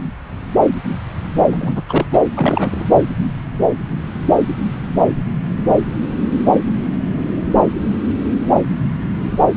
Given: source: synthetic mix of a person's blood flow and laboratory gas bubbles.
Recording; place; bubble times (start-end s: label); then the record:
Doppler ultrasound of blood flow; subclavian vein
1.51-1.82 s: bubbles
1.89-2.06 s: bubbles
2.12-2.21 s: bubbles
2.35-2.85 s: bubbles
From the record:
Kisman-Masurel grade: 212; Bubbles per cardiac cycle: several, 3 to 8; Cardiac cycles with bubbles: 1 to 10%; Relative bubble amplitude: moderate (0.250 to 0.450); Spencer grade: 1 (occasional bubble signal discernible with the cardiac motion signal, with majority of cardiac periods free of bubbles); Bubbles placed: anywhere in the cardiac cycle